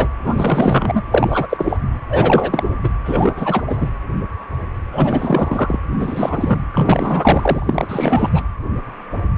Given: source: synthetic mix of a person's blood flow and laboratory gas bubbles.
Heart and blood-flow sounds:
Doppler ultrasound of blood flow; precordium
0.00-0.08 s: bubbles
0.23-1.02 s: bubbles
1.12-1.46 s: bubbles
1.49-1.77 s: bubbles
2.09-2.75 s: bubbles
2.83-2.89 s: bubbles
3.05-3.62 s: bubbles
3.69-3.90 s: bubbles
4.92-5.79 s: bubbles
5.92-6.66 s: bubbles
6.73-8.42 s: bubbles
From the record:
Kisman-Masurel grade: 332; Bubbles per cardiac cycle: rolling drumbeat, 9 or more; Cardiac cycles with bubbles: 50 to 99%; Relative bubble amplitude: moderate (0.250 to 0.450); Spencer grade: 3 (all of the cardiac periods contain showers or single bubble signals, but not dominating or overriding the cardiac motion signals); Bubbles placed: anywhere in the cardiac cycle

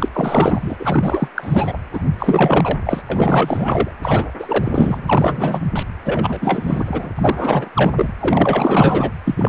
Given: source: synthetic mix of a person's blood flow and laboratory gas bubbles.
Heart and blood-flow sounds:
Doppler ultrasound of blood flow; precordium
0.00-0.76 s: bubbles
0.79-1.28 s: bubbles
1.35-1.78 s: bubbles
1.93-2.02 s: bubbles
2.19-2.80 s: bubbles
2.84-3.01 s: bubbles
3.09-3.91 s: bubbles
4.02-4.33 s: bubbles
4.39-5.62 s: bubbles
5.75-5.83 s: bubbles
6.04-7.10 s: bubbles
7.15-7.70 s: bubbles
7.75-7.92 s: bubbles
7.96-8.12 s: bubbles
8.20-9.12 s: bubbles
9.24-9.49 s: bubbles
From the record:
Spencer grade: 4 (maximum detectable bubble signal sounding continuously throughout systole and diastole of every cardiac period, and overriding the amplitude of the normal cardiac signals); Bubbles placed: anywhere in the cardiac cycle

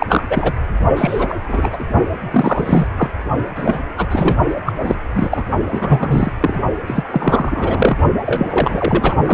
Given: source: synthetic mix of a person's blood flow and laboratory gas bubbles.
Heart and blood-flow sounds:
Doppler ultrasound of blood flow; precordium
0.00-0.23 s: bubbles
0.29-0.52 s: bubbles
0.96-1.35 s: bubbles
1.48-1.69 s: bubbles
1.72-1.84 s: bubbles
2.31-2.88 s: bubbles
2.97-3.10 s: bubbles
3.55-3.79 s: bubbles
3.98-4.36 s: bubbles
4.47-4.55 s: bubbles
4.66-4.72 s: bubbles
4.82-4.98 s: bubbles
5.13-5.43 s: bubbles
5.62-6.32 s: bubbles
6.40-6.61 s: bubbles
6.87-7.03 s: bubbles
7.10-7.96 s: bubbles
8.25-8.46 s: bubbles
8.49-9.15 s: bubbles
9.25-9.34 s: bubbles
From the record:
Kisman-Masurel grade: 343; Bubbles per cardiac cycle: rolling drumbeat, 9 or more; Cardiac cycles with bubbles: 100%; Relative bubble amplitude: loud (0.450 to 0.775); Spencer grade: 3 (all of the cardiac periods contain showers or single bubble signals, but not dominating or overriding the cardiac motion signals); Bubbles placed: only in the low amplitude regions of the cardiac cycle

